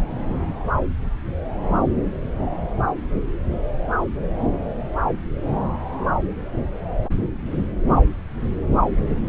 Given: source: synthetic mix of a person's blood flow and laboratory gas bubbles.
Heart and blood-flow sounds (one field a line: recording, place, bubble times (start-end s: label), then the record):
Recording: Doppler ultrasound of blood flow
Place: subclavian vein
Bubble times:
9.09-9.17 s: bubbles
From the record:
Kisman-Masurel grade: 111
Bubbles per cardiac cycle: 1 to 2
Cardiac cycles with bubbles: 1 to 10%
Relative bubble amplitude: barely perceptible (0.100 to 0.250)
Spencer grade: 1 (occasional bubble signal discernible with the cardiac motion signal, with majority of cardiac periods free of bubbles)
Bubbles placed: anywhere in the cardiac cycle